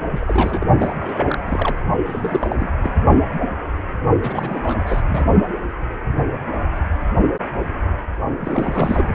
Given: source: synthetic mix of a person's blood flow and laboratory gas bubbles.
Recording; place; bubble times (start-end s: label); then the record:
Doppler ultrasound of blood flow; precordium
0.11-0.67 s: bubbles
0.78-0.96 s: bubbles
1.00-1.39 s: bubbles
1.46-1.78 s: bubbles
2.05-2.70 s: bubbles
2.82-2.92 s: bubbles
4.19-4.60 s: bubbles
4.63-4.77 s: bubbles
4.86-5.02 s: bubbles
5.09-5.25 s: bubbles
8.41-9.09 s: bubbles
From the record:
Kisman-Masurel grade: 332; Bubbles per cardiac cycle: rolling drumbeat, 9 or more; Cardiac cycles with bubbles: 50 to 99%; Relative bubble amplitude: moderate (0.250 to 0.450); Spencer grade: 3 (all of the cardiac periods contain showers or single bubble signals, but not dominating or overriding the cardiac motion signals); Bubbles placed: only in the low amplitude regions of the cardiac cycle